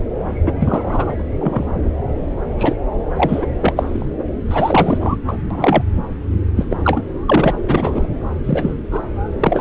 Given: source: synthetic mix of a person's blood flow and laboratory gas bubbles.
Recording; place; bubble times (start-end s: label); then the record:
Doppler ultrasound of blood flow; subclavian vein
0.44-0.53 s: bubbles
0.59-1.24 s: bubbles
1.40-1.91 s: bubbles
2.58-2.74 s: bubbles
3.16-3.47 s: bubbles
3.60-3.73 s: bubbles
3.75-4.06 s: bubbles
4.47-5.17 s: bubbles
5.27-5.36 s: bubbles
5.50-5.83 s: bubbles
6.56-6.66 s: bubbles
6.69-6.76 s: bubbles
6.83-7.02 s: bubbles
7.26-7.52 s: bubbles
7.65-8.07 s: bubbles
8.44-8.74 s: bubbles
8.90-9.03 s: bubbles
9.40-9.61 s: bubbles
From the record:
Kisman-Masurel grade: 243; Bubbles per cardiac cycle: several, 3 to 8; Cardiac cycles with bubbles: 100%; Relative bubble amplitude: loud (0.450 to 0.775); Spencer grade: 3 (all of the cardiac periods contain showers or single bubble signals, but not dominating or overriding the cardiac motion signals); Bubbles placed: anywhere in the cardiac cycle